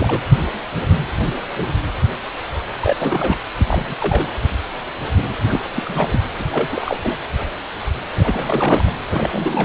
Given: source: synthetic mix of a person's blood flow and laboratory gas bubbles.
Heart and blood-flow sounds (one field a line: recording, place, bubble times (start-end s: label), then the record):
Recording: Doppler ultrasound of blood flow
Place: precordium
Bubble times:
0.00-0.22 s: bubbles
2.81-3.43 s: bubbles
3.58-3.94 s: bubbles
4.00-4.33 s: bubbles
5.47-5.60 s: bubbles
5.75-6.21 s: bubbles
6.39-6.44 s: bubbles
6.51-6.67 s: bubbles
6.71-6.97 s: bubbles
7.01-7.18 s: bubbles
8.16-8.90 s: bubbles
9.09-9.65 s: bubbles
From the record:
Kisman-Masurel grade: 332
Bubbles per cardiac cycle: rolling drumbeat, 9 or more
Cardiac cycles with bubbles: 50 to 99%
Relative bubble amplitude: moderate (0.250 to 0.450)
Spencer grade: 3 (all of the cardiac periods contain showers or single bubble signals, but not dominating or overriding the cardiac motion signals)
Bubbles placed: anywhere in the cardiac cycle